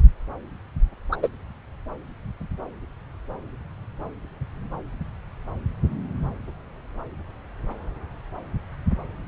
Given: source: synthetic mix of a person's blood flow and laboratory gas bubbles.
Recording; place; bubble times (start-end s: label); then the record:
Doppler ultrasound of blood flow; subclavian vein
1.11-1.17 s: bubbles
1.22-1.29 s: bubbles
From the record:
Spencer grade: 1 (occasional bubble signal discernible with the cardiac motion signal, with majority of cardiac periods free of bubbles); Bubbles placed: anywhere in the cardiac cycle